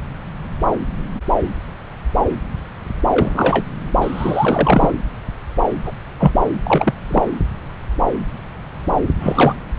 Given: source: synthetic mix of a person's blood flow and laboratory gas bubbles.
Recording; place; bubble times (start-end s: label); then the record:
Doppler ultrasound of blood flow; subclavian vein
3.10-3.65 s: bubbles
4.01-4.91 s: bubbles
5.84-5.92 s: bubbles
6.18-6.32 s: bubbles
6.63-6.94 s: bubbles
7.09-7.23 s: bubbles
9.20-9.55 s: bubbles
From the record:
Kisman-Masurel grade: 223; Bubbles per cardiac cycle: several, 3 to 8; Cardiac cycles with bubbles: 10 to 50%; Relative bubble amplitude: loud (0.450 to 0.775); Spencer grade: 2 (many but less than half of the cardiac periods contain bubble signals, singularly or in groups); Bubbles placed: anywhere in the cardiac cycle